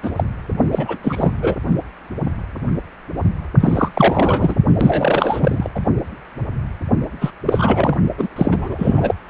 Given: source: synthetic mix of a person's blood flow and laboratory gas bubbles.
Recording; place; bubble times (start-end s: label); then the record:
Doppler ultrasound of blood flow; precordium
0.03-0.11 s: bubbles
0.16-0.24 s: bubbles
0.71-0.97 s: bubbles
1.02-1.31 s: bubbles
1.42-1.55 s: bubbles
3.60-3.88 s: bubbles
3.93-4.55 s: bubbles
4.79-5.70 s: bubbles
5.75-5.80 s: bubbles
7.21-7.31 s: bubbles
7.46-7.97 s: bubbles
8.17-8.29 s: bubbles
8.36-9.14 s: bubbles
9.28-9.30 s: bubbles
From the record:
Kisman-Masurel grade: 333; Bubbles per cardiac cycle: rolling drumbeat, 9 or more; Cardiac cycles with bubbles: 50 to 99%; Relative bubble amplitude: loud (0.450 to 0.775); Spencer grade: 3 (all of the cardiac periods contain showers or single bubble signals, but not dominating or overriding the cardiac motion signals); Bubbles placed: only in the low amplitude regions of the cardiac cycle